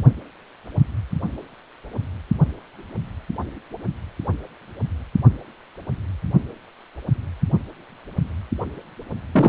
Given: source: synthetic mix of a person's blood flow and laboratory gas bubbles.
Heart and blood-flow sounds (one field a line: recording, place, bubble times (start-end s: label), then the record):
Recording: Doppler ultrasound of blood flow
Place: precordium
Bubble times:
9.33-9.49 s: bubbles
From the record:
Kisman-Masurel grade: 113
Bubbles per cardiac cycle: 1 to 2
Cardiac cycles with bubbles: 1 to 10%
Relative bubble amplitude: loud (0.450 to 0.775)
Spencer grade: 1 (occasional bubble signal discernible with the cardiac motion signal, with majority of cardiac periods free of bubbles)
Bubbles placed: only in the low amplitude regions of the cardiac cycle